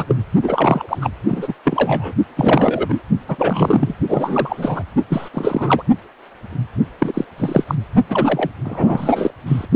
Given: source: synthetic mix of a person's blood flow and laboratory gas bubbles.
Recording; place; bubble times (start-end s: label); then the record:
Doppler ultrasound of blood flow; precordium
0.00-0.05 s: bubbles
0.08-0.16 s: bubbles
0.42-0.97 s: bubbles
1.01-1.10 s: bubbles
1.27-1.54 s: bubbles
1.64-2.13 s: bubbles
2.36-3.03 s: bubbles
3.28-3.94 s: bubbles
4.08-4.83 s: bubbles
5.09-5.29 s: bubbles
5.33-5.83 s: bubbles
6.99-7.25 s: bubbles
7.38-7.64 s: bubbles
7.67-7.75 s: bubbles
8.09-8.50 s: bubbles
8.64-9.31 s: bubbles
9.46-9.67 s: bubbles
From the record:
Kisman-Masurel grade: 333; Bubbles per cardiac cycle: rolling drumbeat, 9 or more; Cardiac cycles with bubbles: 50 to 99%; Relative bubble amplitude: loud (0.450 to 0.775); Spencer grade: 3 (all of the cardiac periods contain showers or single bubble signals, but not dominating or overriding the cardiac motion signals); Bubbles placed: only in the low amplitude regions of the cardiac cycle